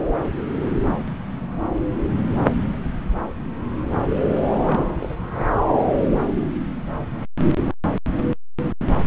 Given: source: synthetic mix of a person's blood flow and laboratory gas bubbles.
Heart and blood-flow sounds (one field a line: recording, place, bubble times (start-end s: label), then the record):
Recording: Doppler ultrasound of blood flow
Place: subclavian vein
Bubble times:
4.66-4.80 s: bubbles
4.99-5.13 s: bubbles
5.34-5.48 s: bubbles
From the record:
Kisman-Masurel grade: 211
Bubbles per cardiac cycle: several, 3 to 8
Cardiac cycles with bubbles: 1 to 10%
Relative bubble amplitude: barely perceptible (0.100 to 0.250)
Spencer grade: 1 (occasional bubble signal discernible with the cardiac motion signal, with majority of cardiac periods free of bubbles)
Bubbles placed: anywhere in the cardiac cycle